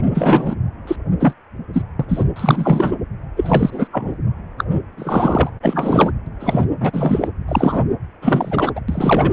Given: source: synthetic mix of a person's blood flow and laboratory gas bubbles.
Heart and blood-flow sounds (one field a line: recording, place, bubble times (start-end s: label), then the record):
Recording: Doppler ultrasound of blood flow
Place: precordium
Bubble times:
0.04-0.55 s: bubbles
0.87-0.96 s: bubbles
1.20-1.33 s: bubbles
1.73-1.84 s: bubbles
1.99-2.05 s: bubbles
2.08-2.24 s: bubbles
2.35-2.97 s: bubbles
3.37-3.88 s: bubbles
3.92-4.14 s: bubbles
4.58-4.64 s: bubbles
4.96-5.50 s: bubbles
5.62-6.10 s: bubbles
6.39-6.65 s: bubbles
6.80-7.28 s: bubbles
7.48-7.81 s: bubbles
8.21-8.72 s: bubbles
8.75-8.81 s: bubbles
8.88-9.33 s: bubbles
From the record:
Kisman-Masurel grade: 243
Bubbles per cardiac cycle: several, 3 to 8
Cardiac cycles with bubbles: 100%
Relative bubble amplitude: loud (0.450 to 0.775)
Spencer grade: 3 (all of the cardiac periods contain showers or single bubble signals, but not dominating or overriding the cardiac motion signals)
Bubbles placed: anywhere in the cardiac cycle